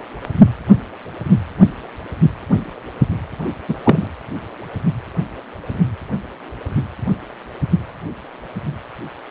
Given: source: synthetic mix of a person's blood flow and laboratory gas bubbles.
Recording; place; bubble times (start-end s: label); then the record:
Doppler ultrasound of blood flow; precordium
3.68-3.75 s: bubbles
3.84-4.07 s: bubbles
From the record:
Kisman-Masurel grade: 113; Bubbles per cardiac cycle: 1 to 2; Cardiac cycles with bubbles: 1 to 10%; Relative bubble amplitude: loud (0.450 to 0.775); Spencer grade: 1 (occasional bubble signal discernible with the cardiac motion signal, with majority of cardiac periods free of bubbles); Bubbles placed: anywhere in the cardiac cycle